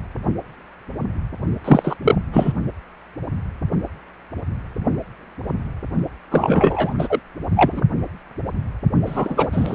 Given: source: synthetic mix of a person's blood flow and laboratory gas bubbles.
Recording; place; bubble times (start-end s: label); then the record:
Doppler ultrasound of blood flow; precordium
1.64-1.96 s: bubbles
2.02-2.15 s: bubbles
2.33-2.52 s: bubbles
6.30-6.95 s: bubbles
6.98-7.19 s: bubbles
7.55-7.82 s: bubbles
9.06-9.75 s: bubbles
From the record:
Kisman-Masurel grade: 333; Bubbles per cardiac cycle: rolling drumbeat, 9 or more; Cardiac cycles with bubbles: 50 to 99%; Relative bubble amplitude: loud (0.450 to 0.775); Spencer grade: 3 (all of the cardiac periods contain showers or single bubble signals, but not dominating or overriding the cardiac motion signals); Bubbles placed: only in the low amplitude regions of the cardiac cycle